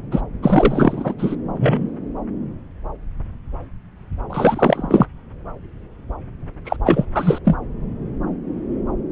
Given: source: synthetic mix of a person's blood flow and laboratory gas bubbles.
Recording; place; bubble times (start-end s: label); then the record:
Doppler ultrasound of blood flow; subclavian vein
0.12-0.21 s: bubbles
0.42-1.14 s: bubbles
1.18-1.35 s: bubbles
1.58-1.89 s: bubbles
4.29-5.07 s: bubbles
6.65-6.76 s: bubbles
6.83-7.05 s: bubbles
7.14-7.38 s: bubbles
7.45-7.56 s: bubbles
From the record:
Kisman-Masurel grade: 333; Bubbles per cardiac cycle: rolling drumbeat, 9 or more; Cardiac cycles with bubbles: 50 to 99%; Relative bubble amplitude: loud (0.450 to 0.775); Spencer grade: 3 (all of the cardiac periods contain showers or single bubble signals, but not dominating or overriding the cardiac motion signals); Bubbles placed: anywhere in the cardiac cycle